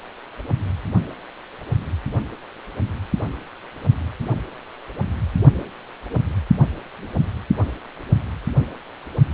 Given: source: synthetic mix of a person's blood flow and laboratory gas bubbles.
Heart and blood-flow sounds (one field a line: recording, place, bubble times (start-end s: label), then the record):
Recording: Doppler ultrasound of blood flow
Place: precordium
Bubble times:
no bubbles
From the record:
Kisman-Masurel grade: 000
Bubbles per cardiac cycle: 0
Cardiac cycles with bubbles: 0%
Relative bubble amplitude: no bubbles discernible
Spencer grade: 0 (complete lack of bubble signals)